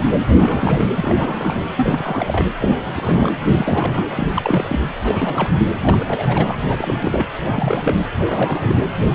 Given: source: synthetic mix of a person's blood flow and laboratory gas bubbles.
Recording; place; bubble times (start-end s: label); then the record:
Doppler ultrasound of blood flow; precordium
0.00-0.04 s: bubbles
0.13-0.23 s: bubbles
0.36-0.90 s: bubbles
0.95-1.62 s: bubbles
1.77-2.47 s: bubbles
2.60-2.77 s: bubbles
2.85-3.31 s: bubbles
3.49-4.04 s: bubbles
4.16-4.27 s: bubbles
4.32-4.79 s: bubbles
5.04-5.60 s: bubbles
5.83-6.56 s: bubbles
6.68-7.27 s: bubbles
7.38-7.96 s: bubbles
8.26-8.76 s: bubbles
9.01-9.05 s: bubbles
9.09-9.15 s: bubbles
From the record:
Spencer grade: 3 (all of the cardiac periods contain showers or single bubble signals, but not dominating or overriding the cardiac motion signals); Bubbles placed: anywhere in the cardiac cycle